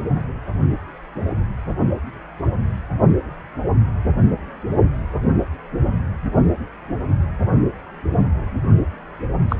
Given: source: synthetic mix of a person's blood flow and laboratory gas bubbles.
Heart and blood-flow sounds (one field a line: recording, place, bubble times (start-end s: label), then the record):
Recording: Doppler ultrasound of blood flow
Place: precordium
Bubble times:
9.48-9.56 s: bubbles
From the record:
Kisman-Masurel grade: 113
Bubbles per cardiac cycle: 1 to 2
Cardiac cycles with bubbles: 1 to 10%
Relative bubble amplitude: loud (0.450 to 0.775)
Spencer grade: 1 (occasional bubble signal discernible with the cardiac motion signal, with majority of cardiac periods free of bubbles)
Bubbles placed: only in the low amplitude regions of the cardiac cycle